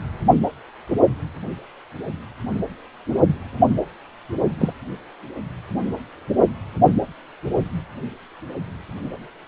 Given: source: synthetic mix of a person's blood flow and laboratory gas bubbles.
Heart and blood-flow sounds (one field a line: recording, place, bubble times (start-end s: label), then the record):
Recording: Doppler ultrasound of blood flow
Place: precordium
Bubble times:
4.59-4.72 s: bubbles
From the record:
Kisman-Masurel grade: 123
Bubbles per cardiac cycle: 1 to 2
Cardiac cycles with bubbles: 10 to 50%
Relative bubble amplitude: loud (0.450 to 0.775)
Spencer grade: 2 (many but less than half of the cardiac periods contain bubble signals, singularly or in groups)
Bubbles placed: only in the low amplitude regions of the cardiac cycle